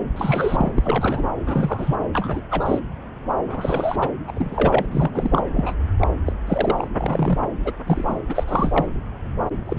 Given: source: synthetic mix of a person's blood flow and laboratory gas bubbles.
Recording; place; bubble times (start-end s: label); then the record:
Doppler ultrasound of blood flow; subclavian vein
0.16-0.72 s: bubbles
0.76-1.24 s: bubbles
1.46-1.96 s: bubbles
2.12-2.41 s: bubbles
2.50-2.79 s: bubbles
3.49-4.08 s: bubbles
4.27-4.85 s: bubbles
4.91-5.11 s: bubbles
5.13-5.43 s: bubbles
5.54-5.83 s: bubbles
6.00-6.07 s: bubbles
6.25-6.32 s: bubbles
6.47-6.88 s: bubbles
6.97-7.39 s: bubbles
7.64-7.72 s: bubbles
7.86-8.20 s: bubbles
8.29-8.44 s: bubbles
8.48-8.86 s: bubbles
9.66-9.79 s: bubbles
From the record:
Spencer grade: 3 (all of the cardiac periods contain showers or single bubble signals, but not dominating or overriding the cardiac motion signals); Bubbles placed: anywhere in the cardiac cycle